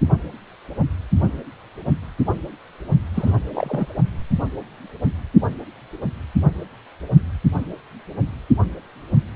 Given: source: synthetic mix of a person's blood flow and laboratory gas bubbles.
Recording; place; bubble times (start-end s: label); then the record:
Doppler ultrasound of blood flow; precordium
3.14-3.35 s: bubbles
3.52-3.88 s: bubbles
From the record:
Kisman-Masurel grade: 222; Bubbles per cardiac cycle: several, 3 to 8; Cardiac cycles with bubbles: 10 to 50%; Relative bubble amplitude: moderate (0.250 to 0.450); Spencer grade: 2 (many but less than half of the cardiac periods contain bubble signals, singularly or in groups); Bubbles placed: only in the low amplitude regions of the cardiac cycle